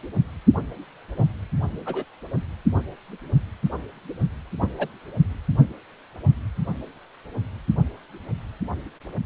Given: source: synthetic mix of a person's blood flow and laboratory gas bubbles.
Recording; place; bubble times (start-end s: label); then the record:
Doppler ultrasound of blood flow; precordium
1.16-1.27 s: bubbles
1.85-2.04 s: bubbles
4.61-4.67 s: bubbles
4.78-4.88 s: bubbles
From the record:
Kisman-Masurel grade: 122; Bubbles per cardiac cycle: 1 to 2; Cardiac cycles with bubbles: 10 to 50%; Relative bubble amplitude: moderate (0.250 to 0.450); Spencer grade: 2 (many but less than half of the cardiac periods contain bubble signals, singularly or in groups); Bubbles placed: only in the low amplitude regions of the cardiac cycle